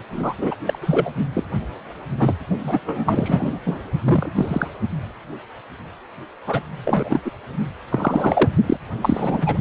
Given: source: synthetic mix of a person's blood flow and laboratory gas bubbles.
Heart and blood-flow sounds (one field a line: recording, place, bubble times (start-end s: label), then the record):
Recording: Doppler ultrasound of blood flow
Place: precordium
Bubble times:
0.12-0.34 s: bubbles
0.38-0.55 s: bubbles
0.65-0.78 s: bubbles
0.81-1.10 s: bubbles
1.33-1.44 s: bubbles
2.19-2.37 s: bubbles
2.63-2.79 s: bubbles
2.85-3.58 s: bubbles
3.65-3.79 s: bubbles
4.04-4.32 s: bubbles
4.35-4.68 s: bubbles
6.47-6.60 s: bubbles
6.85-7.19 s: bubbles
7.25-7.31 s: bubbles
7.89-8.52 s: bubbles
8.63-8.78 s: bubbles
9.02-9.58 s: bubbles
From the record:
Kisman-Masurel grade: 232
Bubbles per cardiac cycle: several, 3 to 8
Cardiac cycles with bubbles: 50 to 99%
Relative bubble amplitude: moderate (0.250 to 0.450)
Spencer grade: 3 (all of the cardiac periods contain showers or single bubble signals, but not dominating or overriding the cardiac motion signals)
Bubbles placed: only in the low amplitude regions of the cardiac cycle